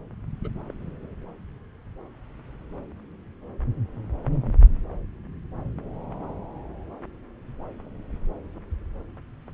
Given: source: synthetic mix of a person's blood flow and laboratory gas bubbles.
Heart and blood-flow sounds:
Doppler ultrasound of blood flow; subclavian vein
0.44-0.49 s: bubbles
0.69-0.73 s: bubbles
From the record:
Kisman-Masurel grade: 111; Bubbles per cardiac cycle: 1 to 2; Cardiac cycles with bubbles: 1 to 10%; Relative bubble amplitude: barely perceptible (0.100 to 0.250); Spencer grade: 1 (occasional bubble signal discernible with the cardiac motion signal, with majority of cardiac periods free of bubbles); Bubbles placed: anywhere in the cardiac cycle

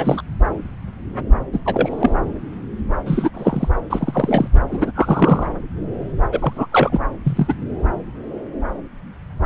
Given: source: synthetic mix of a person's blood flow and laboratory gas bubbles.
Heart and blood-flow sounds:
Doppler ultrasound of blood flow; subclavian vein
0.00-0.21 s: bubbles
1.53-1.59 s: bubbles
1.65-2.16 s: bubbles
3.06-3.29 s: bubbles
3.34-3.69 s: bubbles
3.90-4.48 s: bubbles
4.71-4.92 s: bubbles
4.95-5.46 s: bubbles
6.32-6.66 s: bubbles
6.72-6.98 s: bubbles
7.24-7.54 s: bubbles
From the record:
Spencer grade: 3 (all of the cardiac periods contain showers or single bubble signals, but not dominating or overriding the cardiac motion signals); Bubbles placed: anywhere in the cardiac cycle

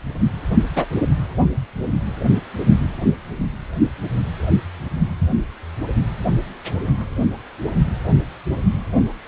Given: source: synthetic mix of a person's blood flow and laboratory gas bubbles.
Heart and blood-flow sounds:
Doppler ultrasound of blood flow; precordium
0.76-0.85 s: bubbles
From the record:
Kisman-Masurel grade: 113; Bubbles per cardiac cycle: 1 to 2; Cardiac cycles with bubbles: 1 to 10%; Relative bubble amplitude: loud (0.450 to 0.775); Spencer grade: 1 (occasional bubble signal discernible with the cardiac motion signal, with majority of cardiac periods free of bubbles); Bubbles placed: only in the low amplitude regions of the cardiac cycle

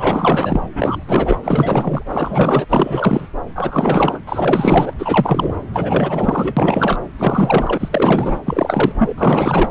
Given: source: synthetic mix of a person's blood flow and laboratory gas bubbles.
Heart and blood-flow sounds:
Doppler ultrasound of blood flow; subclavian vein
0.00-0.60 s: bubbles
0.74-1.36 s: bubbles
1.43-2.65 s: bubbles
2.69-3.27 s: bubbles
3.55-4.19 s: bubbles
4.27-4.93 s: bubbles
4.98-5.55 s: bubbles
5.73-6.98 s: bubbles
7.18-7.89 s: bubbles
7.92-8.39 s: bubbles
8.46-9.14 s: bubbles
9.18-9.71 s: bubbles
From the record:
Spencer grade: 4 (maximum detectable bubble signal sounding continuously throughout systole and diastole of every cardiac period, and overriding the amplitude of the normal cardiac signals); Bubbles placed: anywhere in the cardiac cycle

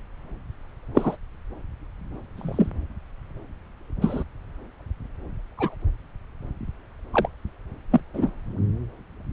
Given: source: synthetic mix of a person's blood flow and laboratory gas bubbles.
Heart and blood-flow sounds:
Doppler ultrasound of blood flow; subclavian vein
0.94-1.17 s: bubbles
2.36-2.69 s: bubbles
4.01-4.23 s: bubbles
5.58-5.75 s: bubbles
7.13-7.28 s: bubbles
7.91-8.01 s: bubbles
8.14-8.31 s: bubbles
From the record:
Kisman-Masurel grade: 122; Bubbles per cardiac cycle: 1 to 2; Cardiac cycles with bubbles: 10 to 50%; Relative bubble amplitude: moderate (0.250 to 0.450); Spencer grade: 2 (many but less than half of the cardiac periods contain bubble signals, singularly or in groups); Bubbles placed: anywhere in the cardiac cycle

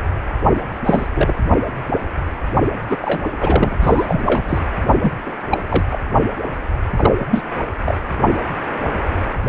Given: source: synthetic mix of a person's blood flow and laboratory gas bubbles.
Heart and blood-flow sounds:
Doppler ultrasound of blood flow; precordium
0.85-1.07 s: bubbles
1.14-1.33 s: bubbles
2.90-2.97 s: bubbles
3.02-3.22 s: bubbles
3.39-3.75 s: bubbles
3.81-4.60 s: bubbles
5.02-5.12 s: bubbles
5.26-5.34 s: bubbles
5.51-5.64 s: bubbles
5.70-5.85 s: bubbles
5.90-5.99 s: bubbles
6.96-7.13 s: bubbles
7.19-7.25 s: bubbles
7.29-7.42 s: bubbles
7.85-7.97 s: bubbles
From the record:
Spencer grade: 3 (all of the cardiac periods contain showers or single bubble signals, but not dominating or overriding the cardiac motion signals); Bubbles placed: only in the low amplitude regions of the cardiac cycle

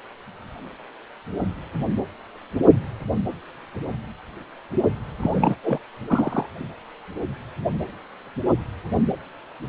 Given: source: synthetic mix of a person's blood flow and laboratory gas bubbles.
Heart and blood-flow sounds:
Doppler ultrasound of blood flow; precordium
5.20-5.55 s: bubbles
5.63-5.79 s: bubbles
6.07-6.46 s: bubbles
From the record:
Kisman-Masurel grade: 212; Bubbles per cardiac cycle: several, 3 to 8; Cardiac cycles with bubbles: 1 to 10%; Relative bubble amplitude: moderate (0.250 to 0.450); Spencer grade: 1 (occasional bubble signal discernible with the cardiac motion signal, with majority of cardiac periods free of bubbles); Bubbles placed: anywhere in the cardiac cycle

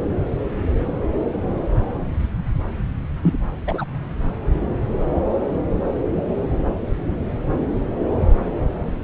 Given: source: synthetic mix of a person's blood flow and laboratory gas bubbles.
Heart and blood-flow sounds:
Doppler ultrasound of blood flow; subclavian vein
3.22-3.38 s: bubbles
3.67-3.85 s: bubbles
From the record:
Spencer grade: 1 (occasional bubble signal discernible with the cardiac motion signal, with majority of cardiac periods free of bubbles); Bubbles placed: anywhere in the cardiac cycle

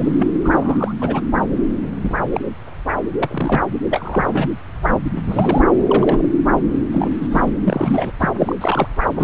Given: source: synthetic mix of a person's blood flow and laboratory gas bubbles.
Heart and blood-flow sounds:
Doppler ultrasound of blood flow; subclavian vein
0.00-0.28 s: bubbles
0.44-0.94 s: bubbles
1.00-1.21 s: bubbles
2.02-2.15 s: bubbles
2.32-2.40 s: bubbles
3.19-3.62 s: bubbles
3.90-4.51 s: bubbles
4.83-4.91 s: bubbles
5.29-5.61 s: bubbles
5.86-6.29 s: bubbles
6.91-7.10 s: bubbles
7.21-7.52 s: bubbles
7.67-8.12 s: bubbles
8.19-8.31 s: bubbles
8.38-8.55 s: bubbles
8.60-8.87 s: bubbles
9.15-9.24 s: bubbles
From the record:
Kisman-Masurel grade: 242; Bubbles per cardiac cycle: several, 3 to 8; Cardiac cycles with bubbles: 100%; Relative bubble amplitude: moderate (0.250 to 0.450); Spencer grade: 3 (all of the cardiac periods contain showers or single bubble signals, but not dominating or overriding the cardiac motion signals); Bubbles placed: anywhere in the cardiac cycle

